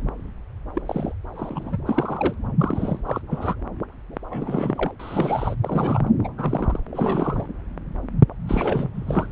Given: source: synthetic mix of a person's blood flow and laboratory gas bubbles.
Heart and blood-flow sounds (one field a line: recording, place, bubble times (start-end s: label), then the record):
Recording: Doppler ultrasound of blood flow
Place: subclavian vein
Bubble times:
0.74-0.82 s: bubbles
0.86-1.12 s: bubbles
1.33-1.78 s: bubbles
1.86-2.34 s: bubbles
2.59-2.99 s: bubbles
3.05-3.21 s: bubbles
3.27-3.55 s: bubbles
4.29-4.92 s: bubbles
4.99-5.54 s: bubbles
5.64-6.12 s: bubbles
6.23-6.28 s: bubbles
6.38-6.80 s: bubbles
6.92-7.46 s: bubbles
8.47-8.90 s: bubbles
8.95-9.32 s: bubbles
From the record:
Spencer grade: 3 (all of the cardiac periods contain showers or single bubble signals, but not dominating or overriding the cardiac motion signals)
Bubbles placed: anywhere in the cardiac cycle